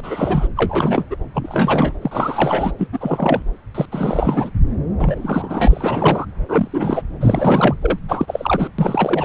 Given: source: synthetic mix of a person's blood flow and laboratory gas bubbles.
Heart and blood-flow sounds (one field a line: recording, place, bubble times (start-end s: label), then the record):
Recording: Doppler ultrasound of blood flow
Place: subclavian vein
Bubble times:
0.00-0.48 s: bubbles
0.57-1.04 s: bubbles
1.10-1.16 s: bubbles
1.33-1.93 s: bubbles
2.01-2.73 s: bubbles
2.78-2.88 s: bubbles
2.92-3.42 s: bubbles
3.75-3.85 s: bubbles
3.92-4.50 s: bubbles
5.00-6.25 s: bubbles
6.49-6.67 s: bubbles
6.73-7.02 s: bubbles
7.21-7.75 s: bubbles
7.81-7.99 s: bubbles
8.09-8.70 s: bubbles
8.78-9.25 s: bubbles
From the record:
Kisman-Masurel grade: 342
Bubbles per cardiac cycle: rolling drumbeat, 9 or more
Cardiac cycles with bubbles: 100%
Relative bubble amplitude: moderate (0.250 to 0.450)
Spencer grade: 3 (all of the cardiac periods contain showers or single bubble signals, but not dominating or overriding the cardiac motion signals)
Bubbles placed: anywhere in the cardiac cycle